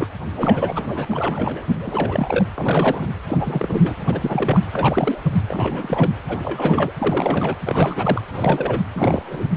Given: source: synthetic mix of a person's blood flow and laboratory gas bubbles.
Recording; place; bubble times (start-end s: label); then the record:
Doppler ultrasound of blood flow; precordium
0.00-0.08 s: bubbles
0.36-1.05 s: bubbles
1.09-1.67 s: bubbles
1.80-2.44 s: bubbles
2.54-3.07 s: bubbles
3.27-3.95 s: bubbles
4.07-4.60 s: bubbles
4.73-5.21 s: bubbles
5.49-6.11 s: bubbles
6.28-6.41 s: bubbles
6.43-6.92 s: bubbles
6.98-7.57 s: bubbles
7.65-8.21 s: bubbles
8.33-8.80 s: bubbles
8.93-9.44 s: bubbles
From the record:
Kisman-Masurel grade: 342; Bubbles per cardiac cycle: rolling drumbeat, 9 or more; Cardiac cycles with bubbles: 100%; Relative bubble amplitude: moderate (0.250 to 0.450); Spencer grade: 3 (all of the cardiac periods contain showers or single bubble signals, but not dominating or overriding the cardiac motion signals); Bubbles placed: anywhere in the cardiac cycle